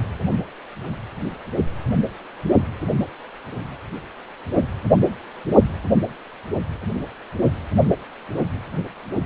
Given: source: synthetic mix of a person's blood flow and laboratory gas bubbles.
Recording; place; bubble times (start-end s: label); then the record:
Doppler ultrasound of blood flow; precordium
no bubbles
From the record:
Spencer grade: 0 (complete lack of bubble signals)